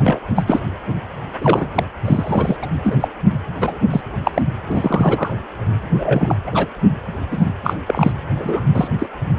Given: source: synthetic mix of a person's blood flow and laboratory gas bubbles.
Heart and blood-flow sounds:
Doppler ultrasound of blood flow; precordium
0.00-0.19 s: bubbles
0.35-0.43 s: bubbles
0.47-0.60 s: bubbles
1.41-1.68 s: bubbles
1.74-1.83 s: bubbles
2.05-2.56 s: bubbles
2.62-2.67 s: bubbles
2.84-2.97 s: bubbles
3.00-3.08 s: bubbles
3.60-3.79 s: bubbles
3.90-4.01 s: bubbles
4.24-4.31 s: bubbles
4.34-4.42 s: bubbles
4.69-5.34 s: bubbles
5.89-6.35 s: bubbles
6.46-6.67 s: bubbles
7.31-7.53 s: bubbles
7.64-7.75 s: bubbles
7.86-8.12 s: bubbles
8.34-8.63 s: bubbles
8.75-8.88 s: bubbles
8.98-9.06 s: bubbles
From the record:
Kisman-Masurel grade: 243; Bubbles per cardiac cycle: several, 3 to 8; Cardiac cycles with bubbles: 100%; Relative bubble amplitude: loud (0.450 to 0.775); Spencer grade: 3 (all of the cardiac periods contain showers or single bubble signals, but not dominating or overriding the cardiac motion signals); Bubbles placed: anywhere in the cardiac cycle

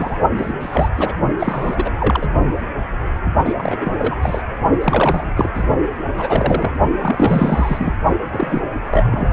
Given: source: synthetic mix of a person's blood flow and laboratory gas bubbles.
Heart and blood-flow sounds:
Doppler ultrasound of blood flow; precordium
0.00-0.19 s: bubbles
0.38-0.54 s: bubbles
0.60-0.89 s: bubbles
0.97-1.14 s: bubbles
1.38-1.90 s: bubbles
2.00-2.27 s: bubbles
3.45-3.54 s: bubbles
3.58-3.92 s: bubbles
3.98-4.16 s: bubbles
4.22-4.42 s: bubbles
4.81-5.31 s: bubbles
5.37-5.50 s: bubbles
5.54-5.63 s: bubbles
6.17-6.72 s: bubbles
7.01-7.93 s: bubbles
8.32-8.62 s: bubbles
8.90-9.29 s: bubbles
From the record:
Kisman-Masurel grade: 332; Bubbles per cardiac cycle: rolling drumbeat, 9 or more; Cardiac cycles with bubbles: 50 to 99%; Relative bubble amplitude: moderate (0.250 to 0.450); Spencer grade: 3 (all of the cardiac periods contain showers or single bubble signals, but not dominating or overriding the cardiac motion signals); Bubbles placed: only in the low amplitude regions of the cardiac cycle

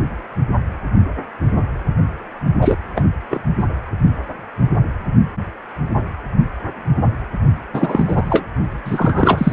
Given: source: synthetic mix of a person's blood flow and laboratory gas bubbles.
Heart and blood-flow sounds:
Doppler ultrasound of blood flow; precordium
2.61-2.78 s: bubbles
2.95-3.08 s: bubbles
3.30-3.43 s: bubbles
3.58-3.65 s: bubbles
7.73-8.45 s: bubbles
8.84-9.52 s: bubbles
From the record:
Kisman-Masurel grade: 233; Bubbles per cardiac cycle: several, 3 to 8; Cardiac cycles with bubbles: 50 to 99%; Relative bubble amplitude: loud (0.450 to 0.775); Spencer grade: 3 (all of the cardiac periods contain showers or single bubble signals, but not dominating or overriding the cardiac motion signals); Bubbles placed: only in the low amplitude regions of the cardiac cycle

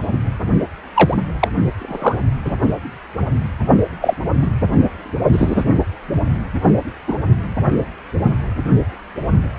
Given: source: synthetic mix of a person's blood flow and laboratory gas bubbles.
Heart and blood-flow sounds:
Doppler ultrasound of blood flow; precordium
0.94-1.17 s: bubbles
1.40-1.48 s: bubbles
1.78-2.22 s: bubbles
2.45-2.54 s: bubbles
4.01-4.14 s: bubbles
4.42-4.50 s: bubbles
5.32-5.64 s: bubbles
7.07-7.15 s: bubbles
From the record:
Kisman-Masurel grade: 123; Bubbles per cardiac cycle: 1 to 2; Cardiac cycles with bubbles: 10 to 50%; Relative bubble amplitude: loud (0.450 to 0.775); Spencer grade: 2 (many but less than half of the cardiac periods contain bubble signals, singularly or in groups); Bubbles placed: only in the low amplitude regions of the cardiac cycle

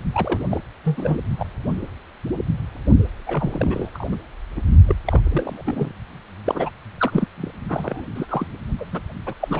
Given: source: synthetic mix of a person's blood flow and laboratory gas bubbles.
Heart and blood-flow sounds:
Doppler ultrasound of blood flow; precordium
0.12-0.61 s: bubbles
0.84-1.19 s: bubbles
1.39-1.46 s: bubbles
3.27-3.90 s: bubbles
3.94-4.07 s: bubbles
4.11-4.16 s: bubbles
4.56-4.61 s: bubbles
4.86-4.94 s: bubbles
5.05-5.22 s: bubbles
5.25-5.62 s: bubbles
5.65-5.92 s: bubbles
6.44-6.71 s: bubbles
6.98-7.27 s: bubbles
7.37-7.51 s: bubbles
7.68-8.05 s: bubbles
8.14-8.46 s: bubbles
8.79-8.84 s: bubbles
8.92-9.02 s: bubbles
9.26-9.34 s: bubbles
9.40-9.60 s: bubbles
From the record:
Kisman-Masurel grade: 332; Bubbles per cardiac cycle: rolling drumbeat, 9 or more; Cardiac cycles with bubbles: 50 to 99%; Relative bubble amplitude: moderate (0.250 to 0.450); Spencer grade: 3 (all of the cardiac periods contain showers or single bubble signals, but not dominating or overriding the cardiac motion signals); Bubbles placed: only in the low amplitude regions of the cardiac cycle

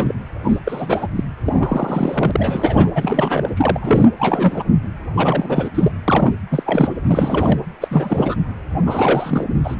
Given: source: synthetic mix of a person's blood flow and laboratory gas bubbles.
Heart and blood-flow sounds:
Doppler ultrasound of blood flow; precordium
0.00-0.13 s: bubbles
0.42-0.59 s: bubbles
0.64-1.08 s: bubbles
1.16-1.24 s: bubbles
1.44-2.90 s: bubbles
2.95-3.50 s: bubbles
3.56-4.08 s: bubbles
4.19-4.65 s: bubbles
5.15-5.68 s: bubbles
5.74-5.92 s: bubbles
6.07-6.32 s: bubbles
6.50-6.63 s: bubbles
6.66-6.94 s: bubbles
7.03-7.59 s: bubbles
7.80-7.88 s: bubbles
7.90-8.36 s: bubbles
8.85-9.46 s: bubbles
9.63-9.75 s: bubbles
From the record:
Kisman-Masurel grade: 343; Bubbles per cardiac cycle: rolling drumbeat, 9 or more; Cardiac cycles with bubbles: 100%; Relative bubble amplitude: loud (0.450 to 0.775); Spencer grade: 3 (all of the cardiac periods contain showers or single bubble signals, but not dominating or overriding the cardiac motion signals); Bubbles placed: anywhere in the cardiac cycle

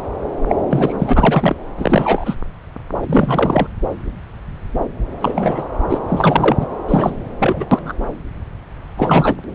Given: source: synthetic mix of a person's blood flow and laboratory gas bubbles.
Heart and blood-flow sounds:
Doppler ultrasound of blood flow; subclavian vein
0.48-0.55 s: bubbles
0.70-1.56 s: bubbles
1.77-2.35 s: bubbles
3.00-3.67 s: bubbles
5.21-5.66 s: bubbles
5.89-6.00 s: bubbles
6.08-6.56 s: bubbles
6.59-6.67 s: bubbles
6.88-7.14 s: bubbles
7.39-7.67 s: bubbles
7.71-7.93 s: bubbles
8.97-9.37 s: bubbles
From the record:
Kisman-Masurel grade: 333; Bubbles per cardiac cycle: rolling drumbeat, 9 or more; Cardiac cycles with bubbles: 50 to 99%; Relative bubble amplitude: loud (0.450 to 0.775); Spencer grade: 3 (all of the cardiac periods contain showers or single bubble signals, but not dominating or overriding the cardiac motion signals); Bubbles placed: anywhere in the cardiac cycle

